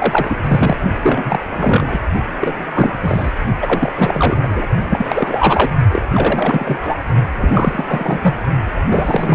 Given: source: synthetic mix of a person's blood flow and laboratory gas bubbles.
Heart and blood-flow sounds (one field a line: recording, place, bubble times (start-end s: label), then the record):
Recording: Doppler ultrasound of blood flow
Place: precordium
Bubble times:
0.00-0.36 s: bubbles
0.44-0.77 s: bubbles
1.02-1.40 s: bubbles
1.52-2.00 s: bubbles
2.40-2.67 s: bubbles
2.74-2.94 s: bubbles
3.01-3.31 s: bubbles
3.61-3.92 s: bubbles
3.96-4.38 s: bubbles
4.42-4.67 s: bubbles
4.90-5.70 s: bubbles
5.92-6.04 s: bubbles
6.12-6.78 s: bubbles
6.81-6.95 s: bubbles
7.40-7.84 s: bubbles
7.87-8.35 s: bubbles
8.88-9.35 s: bubbles
From the record:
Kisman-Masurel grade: 333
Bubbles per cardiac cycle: rolling drumbeat, 9 or more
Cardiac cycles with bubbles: 50 to 99%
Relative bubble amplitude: loud (0.450 to 0.775)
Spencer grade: 3 (all of the cardiac periods contain showers or single bubble signals, but not dominating or overriding the cardiac motion signals)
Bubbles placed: only in the low amplitude regions of the cardiac cycle